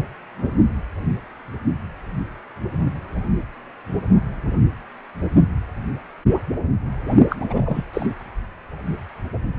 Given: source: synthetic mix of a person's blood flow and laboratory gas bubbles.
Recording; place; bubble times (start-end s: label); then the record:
Doppler ultrasound of blood flow; precordium
7.29-7.36 s: bubbles
7.39-7.85 s: bubbles
7.93-8.06 s: bubbles
From the record:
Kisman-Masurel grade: 212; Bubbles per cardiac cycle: several, 3 to 8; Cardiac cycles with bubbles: 1 to 10%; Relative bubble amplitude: moderate (0.250 to 0.450); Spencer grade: 1 (occasional bubble signal discernible with the cardiac motion signal, with majority of cardiac periods free of bubbles); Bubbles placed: only in the low amplitude regions of the cardiac cycle